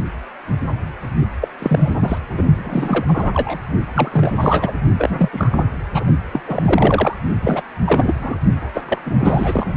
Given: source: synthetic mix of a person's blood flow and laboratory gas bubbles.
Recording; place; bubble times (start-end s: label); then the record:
Doppler ultrasound of blood flow; precordium
1.41-1.48 s: bubbles
1.58-2.18 s: bubbles
2.33-2.43 s: bubbles
2.57-3.05 s: bubbles
3.08-3.59 s: bubbles
3.94-4.74 s: bubbles
4.98-5.29 s: bubbles
5.33-5.63 s: bubbles
5.94-6.04 s: bubbles
6.32-6.41 s: bubbles
6.47-7.14 s: bubbles
7.42-7.63 s: bubbles
7.84-8.15 s: bubbles
8.19-8.36 s: bubbles
8.74-8.81 s: bubbles
8.88-8.99 s: bubbles
9.04-9.75 s: bubbles
From the record:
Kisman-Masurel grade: 332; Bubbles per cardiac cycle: rolling drumbeat, 9 or more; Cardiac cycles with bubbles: 50 to 99%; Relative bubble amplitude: moderate (0.250 to 0.450); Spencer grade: 3 (all of the cardiac periods contain showers or single bubble signals, but not dominating or overriding the cardiac motion signals); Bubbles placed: only in the low amplitude regions of the cardiac cycle